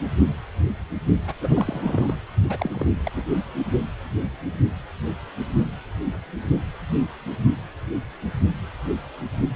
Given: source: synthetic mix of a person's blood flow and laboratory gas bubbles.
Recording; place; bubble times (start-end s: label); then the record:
Doppler ultrasound of blood flow; precordium
1.27-1.33 s: bubbles
1.41-2.14 s: bubbles
2.49-2.86 s: bubbles
3.04-3.11 s: bubbles
3.15-3.24 s: bubbles
From the record:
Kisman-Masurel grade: 221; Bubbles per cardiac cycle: several, 3 to 8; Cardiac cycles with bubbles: 10 to 50%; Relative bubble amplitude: barely perceptible (0.100 to 0.250); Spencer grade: 2 (many but less than half of the cardiac periods contain bubble signals, singularly or in groups); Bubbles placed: only in the low amplitude regions of the cardiac cycle